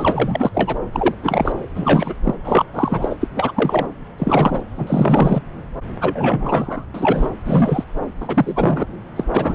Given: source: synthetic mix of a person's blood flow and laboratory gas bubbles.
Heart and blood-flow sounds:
Doppler ultrasound of blood flow; subclavian vein
0.00-0.51 s: bubbles
0.54-0.79 s: bubbles
0.93-1.15 s: bubbles
1.23-1.68 s: bubbles
1.76-2.15 s: bubbles
2.24-2.34 s: bubbles
2.44-2.66 s: bubbles
2.74-3.16 s: bubbles
3.21-3.28 s: bubbles
3.35-3.51 s: bubbles
3.54-3.86 s: bubbles
4.18-4.61 s: bubbles
4.77-5.42 s: bubbles
6.00-6.85 s: bubbles
6.94-7.29 s: bubbles
7.45-7.84 s: bubbles
8.20-8.86 s: bubbles
9.16-9.24 s: bubbles
9.32-9.55 s: bubbles
From the record:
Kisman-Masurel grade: 343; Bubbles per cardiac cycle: rolling drumbeat, 9 or more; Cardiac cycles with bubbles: 100%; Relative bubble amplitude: loud (0.450 to 0.775); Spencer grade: 3 (all of the cardiac periods contain showers or single bubble signals, but not dominating or overriding the cardiac motion signals); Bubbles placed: anywhere in the cardiac cycle

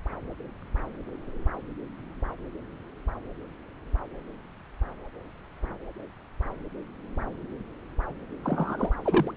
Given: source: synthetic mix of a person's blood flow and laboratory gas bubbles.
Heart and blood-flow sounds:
Doppler ultrasound of blood flow; subclavian vein
8.44-8.90 s: bubbles
9.04-9.31 s: bubbles
From the record:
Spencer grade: 1 (occasional bubble signal discernible with the cardiac motion signal, with majority of cardiac periods free of bubbles); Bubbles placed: anywhere in the cardiac cycle

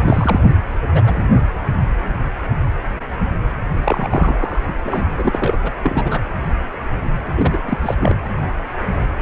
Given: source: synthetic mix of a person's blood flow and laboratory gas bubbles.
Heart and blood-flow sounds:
Doppler ultrasound of blood flow; precordium
0.05-0.40 s: bubbles
0.95-1.01 s: bubbles
1.04-1.27 s: bubbles
3.84-4.60 s: bubbles
4.67-4.74 s: bubbles
4.83-5.01 s: bubbles
5.17-5.58 s: bubbles
5.61-5.70 s: bubbles
5.83-6.21 s: bubbles
7.35-7.77 s: bubbles
7.81-7.94 s: bubbles
7.99-8.15 s: bubbles
From the record:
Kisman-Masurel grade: 332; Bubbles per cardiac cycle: rolling drumbeat, 9 or more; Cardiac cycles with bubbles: 50 to 99%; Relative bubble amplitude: moderate (0.250 to 0.450); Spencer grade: 3 (all of the cardiac periods contain showers or single bubble signals, but not dominating or overriding the cardiac motion signals); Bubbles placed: anywhere in the cardiac cycle

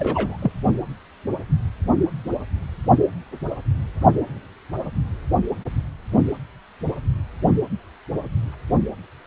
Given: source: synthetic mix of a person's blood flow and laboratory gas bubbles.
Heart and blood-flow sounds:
Doppler ultrasound of blood flow; precordium
0.00-0.37 s: bubbles
0.42-0.52 s: bubbles
From the record:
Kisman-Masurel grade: 212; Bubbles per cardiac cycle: several, 3 to 8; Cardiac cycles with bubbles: 1 to 10%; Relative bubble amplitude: moderate (0.250 to 0.450); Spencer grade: 1 (occasional bubble signal discernible with the cardiac motion signal, with majority of cardiac periods free of bubbles); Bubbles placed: only in the low amplitude regions of the cardiac cycle

